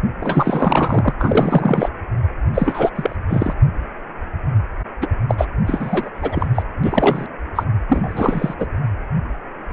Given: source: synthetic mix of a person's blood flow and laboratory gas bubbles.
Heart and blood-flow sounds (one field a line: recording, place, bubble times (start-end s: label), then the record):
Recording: Doppler ultrasound of blood flow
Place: precordium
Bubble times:
0.20-1.14 s: bubbles
1.19-1.90 s: bubbles
2.53-2.90 s: bubbles
2.95-3.16 s: bubbles
3.27-3.53 s: bubbles
5.01-5.08 s: bubbles
5.28-5.45 s: bubbles
5.67-6.10 s: bubbles
6.14-6.62 s: bubbles
6.83-7.26 s: bubbles
7.55-7.64 s: bubbles
7.89-8.54 s: bubbles
8.58-8.66 s: bubbles
From the record:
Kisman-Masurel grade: 333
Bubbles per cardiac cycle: rolling drumbeat, 9 or more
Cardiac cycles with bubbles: 50 to 99%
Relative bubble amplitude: loud (0.450 to 0.775)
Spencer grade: 3 (all of the cardiac periods contain showers or single bubble signals, but not dominating or overriding the cardiac motion signals)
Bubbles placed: anywhere in the cardiac cycle